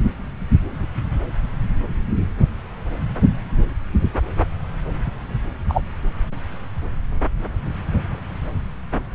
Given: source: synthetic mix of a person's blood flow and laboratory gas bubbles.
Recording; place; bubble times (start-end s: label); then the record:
Doppler ultrasound of blood flow; subclavian vein
5.68-5.81 s: bubbles
From the record:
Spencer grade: 1 (occasional bubble signal discernible with the cardiac motion signal, with majority of cardiac periods free of bubbles); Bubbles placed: anywhere in the cardiac cycle